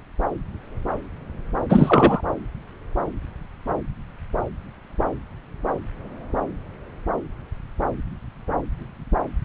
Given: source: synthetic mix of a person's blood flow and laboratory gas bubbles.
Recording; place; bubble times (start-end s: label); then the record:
Doppler ultrasound of blood flow; subclavian vein
1.69-2.21 s: bubbles
From the record:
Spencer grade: 2 (many but less than half of the cardiac periods contain bubble signals, singularly or in groups); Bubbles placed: anywhere in the cardiac cycle